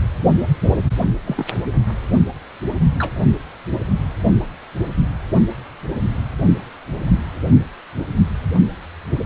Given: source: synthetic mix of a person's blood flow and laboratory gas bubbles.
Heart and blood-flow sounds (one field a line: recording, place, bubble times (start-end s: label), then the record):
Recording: Doppler ultrasound of blood flow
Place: precordium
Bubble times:
1.25-1.49 s: bubbles
2.98-3.13 s: bubbles
From the record:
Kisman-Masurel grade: 122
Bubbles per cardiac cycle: 1 to 2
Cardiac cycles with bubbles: 10 to 50%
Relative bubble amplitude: moderate (0.250 to 0.450)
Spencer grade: 2 (many but less than half of the cardiac periods contain bubble signals, singularly or in groups)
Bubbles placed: only in the low amplitude regions of the cardiac cycle